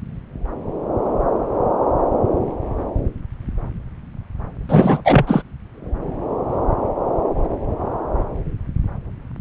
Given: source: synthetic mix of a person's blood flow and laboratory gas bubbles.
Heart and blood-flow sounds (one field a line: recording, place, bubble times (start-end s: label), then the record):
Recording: Doppler ultrasound of blood flow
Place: subclavian vein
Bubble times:
4.69-5.01 s: bubbles
5.04-5.42 s: bubbles
From the record:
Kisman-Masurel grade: 213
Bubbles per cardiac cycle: several, 3 to 8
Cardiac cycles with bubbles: 1 to 10%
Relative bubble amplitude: loud (0.450 to 0.775)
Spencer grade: 1 (occasional bubble signal discernible with the cardiac motion signal, with majority of cardiac periods free of bubbles)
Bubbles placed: anywhere in the cardiac cycle